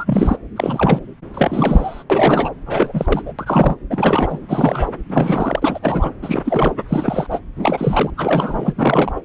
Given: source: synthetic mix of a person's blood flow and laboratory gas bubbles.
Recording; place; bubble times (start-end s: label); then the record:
Doppler ultrasound of blood flow; subclavian vein
0.00-0.37 s: bubbles
0.56-1.00 s: bubbles
1.33-2.04 s: bubbles
2.10-2.50 s: bubbles
2.66-3.22 s: bubbles
3.26-3.33 s: bubbles
3.39-3.77 s: bubbles
3.90-4.39 s: bubbles
4.49-4.89 s: bubbles
5.08-5.79 s: bubbles
5.82-6.12 s: bubbles
6.22-6.42 s: bubbles
6.45-6.72 s: bubbles
6.88-7.27 s: bubbles
7.31-7.40 s: bubbles
7.56-8.10 s: bubbles
8.17-8.72 s: bubbles
8.77-9.21 s: bubbles
From the record:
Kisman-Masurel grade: 342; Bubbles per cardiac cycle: rolling drumbeat, 9 or more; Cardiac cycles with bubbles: 100%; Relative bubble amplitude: moderate (0.250 to 0.450); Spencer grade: 3 (all of the cardiac periods contain showers or single bubble signals, but not dominating or overriding the cardiac motion signals); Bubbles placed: anywhere in the cardiac cycle